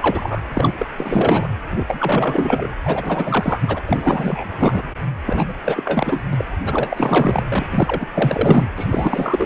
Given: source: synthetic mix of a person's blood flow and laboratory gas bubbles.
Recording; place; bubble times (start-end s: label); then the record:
Doppler ultrasound of blood flow; precordium
0.00-0.44 s: bubbles
0.54-0.74 s: bubbles
0.78-0.86 s: bubbles
0.97-1.48 s: bubbles
1.70-2.68 s: bubbles
2.85-3.83 s: bubbles
3.86-4.83 s: bubbles
5.26-5.54 s: bubbles
5.64-6.22 s: bubbles
6.31-6.46 s: bubbles
6.65-7.43 s: bubbles
7.48-7.64 s: bubbles
7.70-8.07 s: bubbles
8.13-8.69 s: bubbles
8.76-9.46 s: bubbles
From the record:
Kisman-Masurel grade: 444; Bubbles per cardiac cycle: continuous sound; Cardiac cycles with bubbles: 100%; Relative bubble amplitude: maximal (0.775 to 0.999); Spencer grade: 4 (maximum detectable bubble signal sounding continuously throughout systole and diastole of every cardiac period, and overriding the amplitude of the normal cardiac signals); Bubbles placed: anywhere in the cardiac cycle